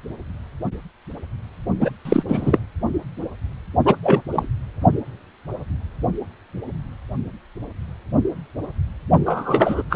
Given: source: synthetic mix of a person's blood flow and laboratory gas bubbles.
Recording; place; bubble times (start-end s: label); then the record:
Doppler ultrasound of blood flow; precordium
1.80-1.91 s: bubbles
2.05-2.23 s: bubbles
2.28-2.59 s: bubbles
3.85-3.96 s: bubbles
4.03-4.21 s: bubbles
4.32-4.47 s: bubbles
9.26-9.82 s: bubbles
9.90-9.96 s: bubbles
From the record:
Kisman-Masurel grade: 223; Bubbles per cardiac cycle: several, 3 to 8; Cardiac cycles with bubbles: 10 to 50%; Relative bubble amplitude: loud (0.450 to 0.775); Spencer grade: 2 (many but less than half of the cardiac periods contain bubble signals, singularly or in groups); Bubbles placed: only in the low amplitude regions of the cardiac cycle